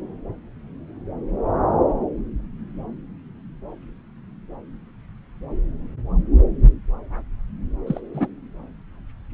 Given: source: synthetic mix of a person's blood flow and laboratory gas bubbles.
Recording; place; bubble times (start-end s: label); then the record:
Doppler ultrasound of blood flow; subclavian vein
7.87-8.00 s: bubbles
8.13-8.28 s: bubbles
From the record:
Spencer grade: 2 (many but less than half of the cardiac periods contain bubble signals, singularly or in groups); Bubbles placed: anywhere in the cardiac cycle